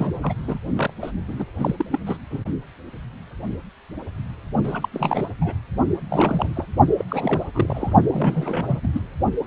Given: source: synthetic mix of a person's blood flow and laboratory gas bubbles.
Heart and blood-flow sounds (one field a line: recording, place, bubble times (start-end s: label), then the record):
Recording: Doppler ultrasound of blood flow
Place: precordium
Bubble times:
0.00-0.33 s: bubbles
0.47-0.58 s: bubbles
0.76-0.91 s: bubbles
1.02-1.11 s: bubbles
1.28-1.46 s: bubbles
1.59-1.85 s: bubbles
1.91-1.99 s: bubbles
2.06-2.18 s: bubbles
2.31-2.43 s: bubbles
4.63-4.88 s: bubbles
4.92-5.26 s: bubbles
5.41-5.54 s: bubbles
6.09-6.67 s: bubbles
6.97-7.05 s: bubbles
7.08-7.47 s: bubbles
7.54-7.93 s: bubbles
8.08-8.79 s: bubbles
8.83-8.88 s: bubbles
8.93-9.02 s: bubbles
From the record:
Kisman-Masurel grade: 332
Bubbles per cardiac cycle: rolling drumbeat, 9 or more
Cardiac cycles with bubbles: 50 to 99%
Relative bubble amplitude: moderate (0.250 to 0.450)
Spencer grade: 3 (all of the cardiac periods contain showers or single bubble signals, but not dominating or overriding the cardiac motion signals)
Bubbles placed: only in the low amplitude regions of the cardiac cycle